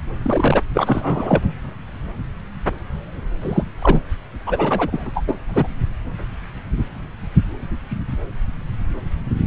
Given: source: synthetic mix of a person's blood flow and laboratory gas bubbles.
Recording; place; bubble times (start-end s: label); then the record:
Doppler ultrasound of blood flow; subclavian vein
0.23-0.61 s: bubbles
0.75-1.42 s: bubbles
3.42-3.63 s: bubbles
3.81-4.01 s: bubbles
4.46-5.24 s: bubbles
5.27-5.35 s: bubbles
5.48-5.67 s: bubbles
From the record:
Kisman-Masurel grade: 223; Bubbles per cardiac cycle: several, 3 to 8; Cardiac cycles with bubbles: 10 to 50%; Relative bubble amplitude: loud (0.450 to 0.775); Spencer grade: 2 (many but less than half of the cardiac periods contain bubble signals, singularly or in groups); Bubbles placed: anywhere in the cardiac cycle